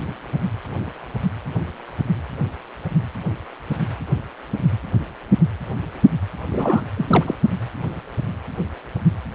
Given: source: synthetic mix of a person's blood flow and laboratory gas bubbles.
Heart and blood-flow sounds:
Doppler ultrasound of blood flow; precordium
6.50-6.83 s: bubbles
6.96-7.24 s: bubbles
7.26-7.35 s: bubbles
From the record:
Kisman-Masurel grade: 212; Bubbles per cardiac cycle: several, 3 to 8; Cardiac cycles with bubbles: 1 to 10%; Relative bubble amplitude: moderate (0.250 to 0.450); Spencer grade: 1 (occasional bubble signal discernible with the cardiac motion signal, with majority of cardiac periods free of bubbles); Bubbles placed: anywhere in the cardiac cycle

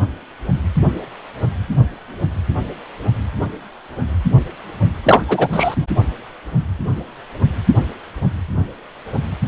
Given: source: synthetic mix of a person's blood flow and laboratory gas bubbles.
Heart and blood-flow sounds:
Doppler ultrasound of blood flow; precordium
5.03-5.23 s: bubbles
5.28-5.48 s: bubbles
5.53-5.75 s: bubbles
From the record:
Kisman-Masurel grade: 213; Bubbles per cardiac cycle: several, 3 to 8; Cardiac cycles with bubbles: 1 to 10%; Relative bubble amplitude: loud (0.450 to 0.775); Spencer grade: 1 (occasional bubble signal discernible with the cardiac motion signal, with majority of cardiac periods free of bubbles); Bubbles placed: anywhere in the cardiac cycle

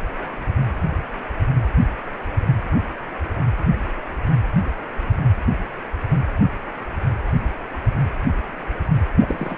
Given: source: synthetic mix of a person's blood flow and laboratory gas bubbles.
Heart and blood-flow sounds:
Doppler ultrasound of blood flow; precordium
9.20-9.57 s: bubbles
From the record:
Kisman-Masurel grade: 211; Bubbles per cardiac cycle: several, 3 to 8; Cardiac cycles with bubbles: 1 to 10%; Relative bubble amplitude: barely perceptible (0.100 to 0.250); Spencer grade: 1 (occasional bubble signal discernible with the cardiac motion signal, with majority of cardiac periods free of bubbles); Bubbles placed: anywhere in the cardiac cycle

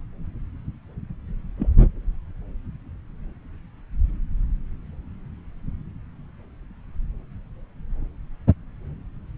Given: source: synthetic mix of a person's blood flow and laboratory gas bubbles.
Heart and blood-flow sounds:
Doppler ultrasound of blood flow; subclavian vein
1.58-1.69 s: bubbles
From the record:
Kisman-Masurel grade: 112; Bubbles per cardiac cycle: 1 to 2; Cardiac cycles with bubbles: 1 to 10%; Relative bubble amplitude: moderate (0.250 to 0.450); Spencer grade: 1 (occasional bubble signal discernible with the cardiac motion signal, with majority of cardiac periods free of bubbles); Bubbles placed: anywhere in the cardiac cycle

